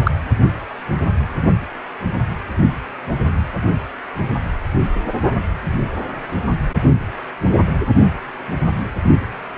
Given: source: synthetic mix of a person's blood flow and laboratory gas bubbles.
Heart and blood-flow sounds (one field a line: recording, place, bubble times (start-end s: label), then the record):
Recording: Doppler ultrasound of blood flow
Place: precordium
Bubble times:
0.04-0.11 s: bubbles
From the record:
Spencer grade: 1 (occasional bubble signal discernible with the cardiac motion signal, with majority of cardiac periods free of bubbles)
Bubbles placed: only in the low amplitude regions of the cardiac cycle